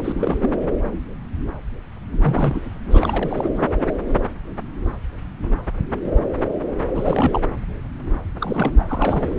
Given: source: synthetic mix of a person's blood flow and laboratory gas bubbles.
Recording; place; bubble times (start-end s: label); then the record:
Doppler ultrasound of blood flow; subclavian vein
0.00-0.37 s: bubbles
0.42-0.73 s: bubbles
2.22-2.61 s: bubbles
2.91-3.50 s: bubbles
3.55-3.67 s: bubbles
6.92-7.41 s: bubbles
8.38-8.73 s: bubbles
8.79-9.38 s: bubbles
From the record:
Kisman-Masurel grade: 332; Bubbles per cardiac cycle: rolling drumbeat, 9 or more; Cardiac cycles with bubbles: 50 to 99%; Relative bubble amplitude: moderate (0.250 to 0.450); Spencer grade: 3 (all of the cardiac periods contain showers or single bubble signals, but not dominating or overriding the cardiac motion signals); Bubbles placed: anywhere in the cardiac cycle